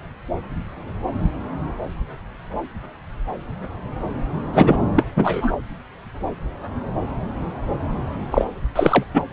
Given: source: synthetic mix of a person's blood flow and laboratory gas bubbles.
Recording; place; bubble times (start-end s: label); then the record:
Doppler ultrasound of blood flow; subclavian vein
4.54-4.77 s: bubbles
4.96-5.06 s: bubbles
5.16-5.55 s: bubbles
8.30-8.45 s: bubbles
8.75-9.05 s: bubbles
9.13-9.23 s: bubbles
From the record:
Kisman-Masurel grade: 223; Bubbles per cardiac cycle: several, 3 to 8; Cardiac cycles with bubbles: 10 to 50%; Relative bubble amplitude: loud (0.450 to 0.775); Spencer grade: 2 (many but less than half of the cardiac periods contain bubble signals, singularly or in groups); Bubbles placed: anywhere in the cardiac cycle